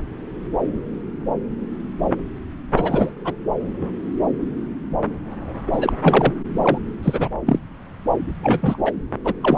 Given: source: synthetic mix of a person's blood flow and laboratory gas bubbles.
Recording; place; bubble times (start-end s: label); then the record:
Doppler ultrasound of blood flow; subclavian vein
2.73-3.11 s: bubbles
3.25-3.34 s: bubbles
5.72-5.92 s: bubbles
6.02-6.33 s: bubbles
6.62-6.78 s: bubbles
7.03-7.29 s: bubbles
7.46-7.59 s: bubbles
8.40-8.78 s: bubbles
8.86-8.91 s: bubbles
9.24-9.34 s: bubbles
9.41-9.58 s: bubbles
From the record:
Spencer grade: 2 (many but less than half of the cardiac periods contain bubble signals, singularly or in groups); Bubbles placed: anywhere in the cardiac cycle